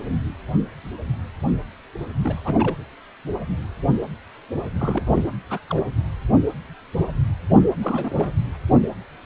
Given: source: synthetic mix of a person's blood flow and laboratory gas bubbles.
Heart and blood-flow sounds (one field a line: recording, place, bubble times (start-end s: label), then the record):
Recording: Doppler ultrasound of blood flow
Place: precordium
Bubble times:
2.22-2.42 s: bubbles
2.44-2.75 s: bubbles
4.79-5.25 s: bubbles
5.50-5.60 s: bubbles
5.70-5.83 s: bubbles
7.83-8.34 s: bubbles
From the record:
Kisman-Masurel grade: 221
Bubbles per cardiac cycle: several, 3 to 8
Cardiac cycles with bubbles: 10 to 50%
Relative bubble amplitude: barely perceptible (0.100 to 0.250)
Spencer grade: 2 (many but less than half of the cardiac periods contain bubble signals, singularly or in groups)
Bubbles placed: anywhere in the cardiac cycle